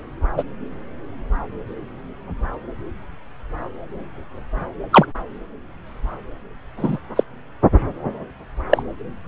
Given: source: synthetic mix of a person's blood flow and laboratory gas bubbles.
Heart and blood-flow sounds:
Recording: Doppler ultrasound of blood flow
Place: subclavian vein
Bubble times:
0.37-0.43 s: bubbles
4.92-5.05 s: bubbles
6.76-6.97 s: bubbles
7.16-7.24 s: bubbles
8.70-8.83 s: bubbles
From the record:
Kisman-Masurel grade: 123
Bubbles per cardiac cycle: 1 to 2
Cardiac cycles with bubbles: 10 to 50%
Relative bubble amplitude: loud (0.450 to 0.775)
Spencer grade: 2 (many but less than half of the cardiac periods contain bubble signals, singularly or in groups)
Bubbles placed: anywhere in the cardiac cycle

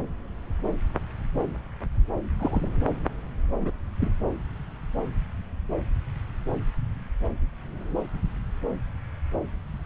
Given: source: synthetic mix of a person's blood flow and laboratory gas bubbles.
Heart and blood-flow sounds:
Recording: Doppler ultrasound of blood flow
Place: subclavian vein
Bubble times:
2.39-2.70 s: bubbles
3.60-3.71 s: bubbles
4.00-4.11 s: bubbles
From the record:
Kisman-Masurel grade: 111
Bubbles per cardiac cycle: 1 to 2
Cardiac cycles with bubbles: 1 to 10%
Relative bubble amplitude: barely perceptible (0.100 to 0.250)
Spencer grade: 1 (occasional bubble signal discernible with the cardiac motion signal, with majority of cardiac periods free of bubbles)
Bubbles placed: anywhere in the cardiac cycle

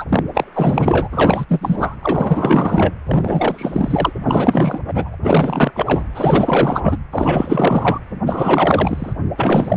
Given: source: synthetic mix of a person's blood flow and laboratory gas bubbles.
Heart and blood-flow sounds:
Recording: Doppler ultrasound of blood flow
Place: precordium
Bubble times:
0.00-0.04 s: bubbles
0.09-0.23 s: bubbles
0.34-0.45 s: bubbles
0.54-1.08 s: bubbles
1.11-1.45 s: bubbles
1.48-1.95 s: bubbles
2.02-2.93 s: bubbles
3.06-4.13 s: bubbles
4.25-4.81 s: bubbles
4.88-5.16 s: bubbles
5.22-5.71 s: bubbles
5.73-6.04 s: bubbles
6.14-6.97 s: bubbles
7.12-7.99 s: bubbles
8.26-9.13 s: bubbles
9.37-9.77 s: bubbles
From the record:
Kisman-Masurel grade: 444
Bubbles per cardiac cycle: continuous sound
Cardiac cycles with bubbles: 100%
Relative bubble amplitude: maximal (0.775 to 0.999)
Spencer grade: 4 (maximum detectable bubble signal sounding continuously throughout systole and diastole of every cardiac period, and overriding the amplitude of the normal cardiac signals)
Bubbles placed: anywhere in the cardiac cycle

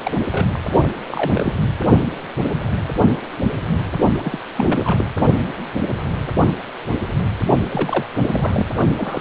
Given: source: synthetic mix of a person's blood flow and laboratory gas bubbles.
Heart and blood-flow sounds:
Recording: Doppler ultrasound of blood flow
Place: precordium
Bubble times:
0.03-0.12 s: bubbles
0.31-0.46 s: bubbles
0.53-0.91 s: bubbles
1.08-1.31 s: bubbles
1.33-1.53 s: bubbles
4.18-4.38 s: bubbles
4.56-5.06 s: bubbles
7.69-8.06 s: bubbles
8.25-8.66 s: bubbles
8.97-9.21 s: bubbles
From the record:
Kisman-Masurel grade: 332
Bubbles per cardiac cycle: rolling drumbeat, 9 or more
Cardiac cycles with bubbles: 50 to 99%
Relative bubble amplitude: moderate (0.250 to 0.450)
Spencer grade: 3 (all of the cardiac periods contain showers or single bubble signals, but not dominating or overriding the cardiac motion signals)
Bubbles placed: only in the low amplitude regions of the cardiac cycle

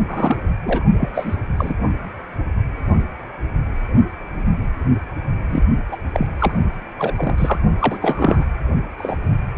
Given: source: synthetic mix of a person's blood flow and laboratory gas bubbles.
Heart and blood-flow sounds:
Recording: Doppler ultrasound of blood flow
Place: precordium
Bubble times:
0.07-0.38 s: bubbles
0.64-0.84 s: bubbles
0.97-1.10 s: bubbles
1.15-1.35 s: bubbles
1.57-1.74 s: bubbles
5.48-5.63 s: bubbles
5.90-5.96 s: bubbles
6.13-6.27 s: bubbles
6.38-6.52 s: bubbles
6.98-7.35 s: bubbles
7.38-7.59 s: bubbles
7.80-8.45 s: bubbles
8.98-9.15 s: bubbles
From the record:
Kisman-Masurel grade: 222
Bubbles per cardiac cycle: several, 3 to 8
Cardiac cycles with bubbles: 10 to 50%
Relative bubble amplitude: moderate (0.250 to 0.450)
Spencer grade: 2 (many but less than half of the cardiac periods contain bubble signals, singularly or in groups)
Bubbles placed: only in the low amplitude regions of the cardiac cycle

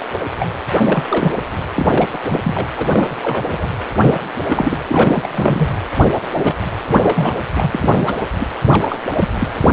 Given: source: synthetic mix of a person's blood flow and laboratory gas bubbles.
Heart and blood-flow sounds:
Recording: Doppler ultrasound of blood flow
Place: precordium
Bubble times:
0.39-0.47 s: bubbles
0.85-1.04 s: bubbles
1.09-1.32 s: bubbles
1.76-1.89 s: bubbles
1.97-2.08 s: bubbles
2.13-2.18 s: bubbles
2.24-2.40 s: bubbles
2.44-2.67 s: bubbles
2.76-3.15 s: bubbles
3.22-3.69 s: bubbles
4.01-4.20 s: bubbles
4.48-4.79 s: bubbles
4.88-5.28 s: bubbles
5.31-5.69 s: bubbles
6.31-6.55 s: bubbles
6.85-7.30 s: bubbles
7.53-8.16 s: bubbles
8.39-8.46 s: bubbles
8.66-9.00 s: bubbles
9.18-9.28 s: bubbles
9.38-9.49 s: bubbles
9.62-9.72 s: bubbles
From the record:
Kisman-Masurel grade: 342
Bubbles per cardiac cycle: rolling drumbeat, 9 or more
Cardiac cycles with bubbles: 100%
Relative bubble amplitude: moderate (0.250 to 0.450)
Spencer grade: 3 (all of the cardiac periods contain showers or single bubble signals, but not dominating or overriding the cardiac motion signals)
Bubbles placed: anywhere in the cardiac cycle

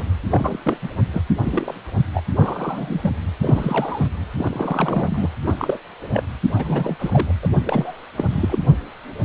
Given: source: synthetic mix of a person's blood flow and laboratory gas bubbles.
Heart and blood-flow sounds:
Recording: Doppler ultrasound of blood flow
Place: precordium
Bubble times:
0.00-0.03 s: bubbles
0.30-0.57 s: bubbles
0.65-0.77 s: bubbles
0.82-0.89 s: bubbles
1.13-1.24 s: bubbles
1.44-1.79 s: bubbles
2.14-2.21 s: bubbles
2.36-3.00 s: bubbles
3.03-3.10 s: bubbles
3.42-4.07 s: bubbles
4.37-5.29 s: bubbles
5.46-5.78 s: bubbles
6.13-6.24 s: bubbles
6.54-7.32 s: bubbles
7.42-7.48 s: bubbles
7.65-8.04 s: bubbles
8.12-8.59 s: bubbles
From the record:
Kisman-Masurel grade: 242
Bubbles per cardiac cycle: several, 3 to 8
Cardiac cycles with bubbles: 100%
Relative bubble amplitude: moderate (0.250 to 0.450)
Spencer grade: 3 (all of the cardiac periods contain showers or single bubble signals, but not dominating or overriding the cardiac motion signals)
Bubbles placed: anywhere in the cardiac cycle

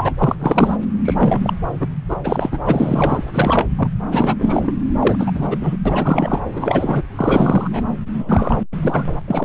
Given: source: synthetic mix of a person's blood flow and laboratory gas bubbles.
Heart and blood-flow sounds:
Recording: Doppler ultrasound of blood flow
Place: subclavian vein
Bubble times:
0.00-0.12 s: bubbles
0.17-0.35 s: bubbles
0.39-0.76 s: bubbles
1.04-1.54 s: bubbles
1.79-1.87 s: bubbles
2.08-2.17 s: bubbles
2.23-2.59 s: bubbles
2.65-3.68 s: bubbles
3.78-3.88 s: bubbles
4.12-4.34 s: bubbles
4.38-4.72 s: bubbles
4.99-5.31 s: bubbles
5.34-5.57 s: bubbles
5.59-5.76 s: bubbles
5.85-6.41 s: bubbles
6.49-7.02 s: bubbles
7.16-7.83 s: bubbles
8.14-8.62 s: bubbles
8.73-9.04 s: bubbles
9.27-9.45 s: bubbles
From the record:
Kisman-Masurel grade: 343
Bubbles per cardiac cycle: rolling drumbeat, 9 or more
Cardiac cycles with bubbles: 100%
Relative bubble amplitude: loud (0.450 to 0.775)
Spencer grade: 3 (all of the cardiac periods contain showers or single bubble signals, but not dominating or overriding the cardiac motion signals)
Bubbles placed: anywhere in the cardiac cycle

